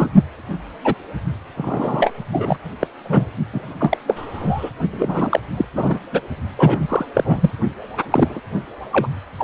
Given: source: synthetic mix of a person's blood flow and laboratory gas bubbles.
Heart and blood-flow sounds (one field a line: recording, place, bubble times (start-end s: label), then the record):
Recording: Doppler ultrasound of blood flow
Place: precordium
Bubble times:
0.00-0.09 s: bubbles
0.84-0.95 s: bubbles
1.57-2.12 s: bubbles
2.32-2.56 s: bubbles
2.81-2.87 s: bubbles
3.04-3.25 s: bubbles
3.52-3.74 s: bubbles
3.80-3.98 s: bubbles
4.07-4.71 s: bubbles
4.90-5.40 s: bubbles
5.56-5.65 s: bubbles
5.74-5.99 s: bubbles
6.12-6.20 s: bubbles
6.56-7.05 s: bubbles
7.14-7.52 s: bubbles
8.11-8.41 s: bubbles
8.92-9.07 s: bubbles
9.38-9.44 s: bubbles
From the record:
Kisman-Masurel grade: 233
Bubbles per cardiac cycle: several, 3 to 8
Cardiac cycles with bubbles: 50 to 99%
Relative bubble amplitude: loud (0.450 to 0.775)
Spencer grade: 3 (all of the cardiac periods contain showers or single bubble signals, but not dominating or overriding the cardiac motion signals)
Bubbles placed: only in the low amplitude regions of the cardiac cycle